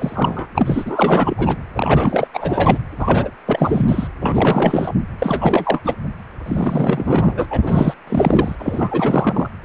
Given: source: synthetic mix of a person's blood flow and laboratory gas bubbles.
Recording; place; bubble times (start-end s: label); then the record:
Doppler ultrasound of blood flow; precordium
0.00-0.47 s: bubbles
0.55-1.57 s: bubbles
1.74-2.27 s: bubbles
2.33-2.78 s: bubbles
2.98-3.31 s: bubbles
3.46-4.08 s: bubbles
4.22-4.92 s: bubbles
5.19-5.81 s: bubbles
5.84-5.96 s: bubbles
6.46-7.47 s: bubbles
7.50-7.94 s: bubbles
8.07-8.55 s: bubbles
8.58-9.50 s: bubbles
9.62-9.64 s: bubbles
From the record:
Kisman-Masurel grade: 444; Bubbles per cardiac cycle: continuous sound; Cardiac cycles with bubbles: 100%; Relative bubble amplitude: maximal (0.775 to 0.999); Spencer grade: 4 (maximum detectable bubble signal sounding continuously throughout systole and diastole of every cardiac period, and overriding the amplitude of the normal cardiac signals); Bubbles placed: anywhere in the cardiac cycle